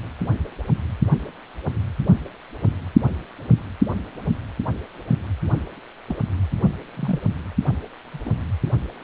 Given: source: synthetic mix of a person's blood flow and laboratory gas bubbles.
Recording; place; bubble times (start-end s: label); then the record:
Doppler ultrasound of blood flow; precordium
6.08-6.15 s: bubbles
6.97-7.19 s: bubbles
8.12-8.33 s: bubbles
From the record:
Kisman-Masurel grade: 121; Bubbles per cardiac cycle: 1 to 2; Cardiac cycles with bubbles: 10 to 50%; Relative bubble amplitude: barely perceptible (0.100 to 0.250); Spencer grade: 2 (many but less than half of the cardiac periods contain bubble signals, singularly or in groups); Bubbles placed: anywhere in the cardiac cycle